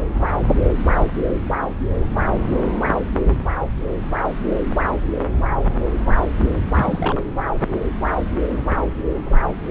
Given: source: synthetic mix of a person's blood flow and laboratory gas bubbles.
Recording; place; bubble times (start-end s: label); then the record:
Doppler ultrasound of blood flow; subclavian vein
6.75-7.23 s: bubbles
From the record:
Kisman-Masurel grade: 212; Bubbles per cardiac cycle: several, 3 to 8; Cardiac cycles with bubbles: 1 to 10%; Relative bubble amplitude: moderate (0.250 to 0.450); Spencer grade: 1 (occasional bubble signal discernible with the cardiac motion signal, with majority of cardiac periods free of bubbles); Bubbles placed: anywhere in the cardiac cycle